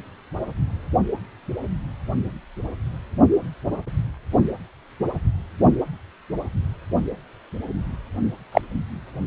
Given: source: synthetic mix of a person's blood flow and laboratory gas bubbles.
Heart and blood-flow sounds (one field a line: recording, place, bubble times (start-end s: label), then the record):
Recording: Doppler ultrasound of blood flow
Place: precordium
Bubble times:
8.51-8.61 s: bubbles
From the record:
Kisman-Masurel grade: 113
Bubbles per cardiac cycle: 1 to 2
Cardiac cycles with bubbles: 1 to 10%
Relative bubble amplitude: loud (0.450 to 0.775)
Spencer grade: 1 (occasional bubble signal discernible with the cardiac motion signal, with majority of cardiac periods free of bubbles)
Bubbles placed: only in the low amplitude regions of the cardiac cycle